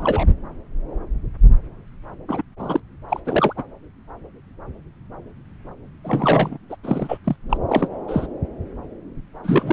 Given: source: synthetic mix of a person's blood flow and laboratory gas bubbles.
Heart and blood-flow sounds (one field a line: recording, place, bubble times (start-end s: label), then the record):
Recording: Doppler ultrasound of blood flow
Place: subclavian vein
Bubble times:
0.00-0.29 s: bubbles
2.28-2.42 s: bubbles
2.59-2.80 s: bubbles
3.08-3.20 s: bubbles
3.25-3.53 s: bubbles
3.56-3.63 s: bubbles
6.04-6.58 s: bubbles
6.70-6.75 s: bubbles
6.83-7.17 s: bubbles
7.24-7.36 s: bubbles
7.49-7.57 s: bubbles
7.68-7.88 s: bubbles
8.08-8.27 s: bubbles
9.43-9.72 s: bubbles
From the record:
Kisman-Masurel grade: 232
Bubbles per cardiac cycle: several, 3 to 8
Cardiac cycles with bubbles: 50 to 99%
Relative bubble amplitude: moderate (0.250 to 0.450)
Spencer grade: 3 (all of the cardiac periods contain showers or single bubble signals, but not dominating or overriding the cardiac motion signals)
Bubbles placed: anywhere in the cardiac cycle